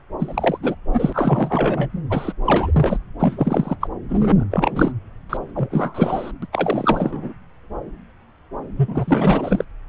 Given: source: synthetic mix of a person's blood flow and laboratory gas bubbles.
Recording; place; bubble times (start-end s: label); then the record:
Doppler ultrasound of blood flow; subclavian vein
0.18-0.58 s: bubbles
0.62-0.75 s: bubbles
0.92-1.89 s: bubbles
2.09-2.33 s: bubbles
2.44-2.98 s: bubbles
3.19-3.76 s: bubbles
3.80-3.88 s: bubbles
4.08-4.45 s: bubbles
4.50-4.93 s: bubbles
5.29-5.37 s: bubbles
5.55-6.31 s: bubbles
6.42-6.46 s: bubbles
6.53-7.34 s: bubbles
8.77-9.64 s: bubbles
From the record:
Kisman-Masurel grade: 333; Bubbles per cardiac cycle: rolling drumbeat, 9 or more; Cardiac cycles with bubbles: 50 to 99%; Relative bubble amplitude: loud (0.450 to 0.775); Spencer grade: 3 (all of the cardiac periods contain showers or single bubble signals, but not dominating or overriding the cardiac motion signals); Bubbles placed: anywhere in the cardiac cycle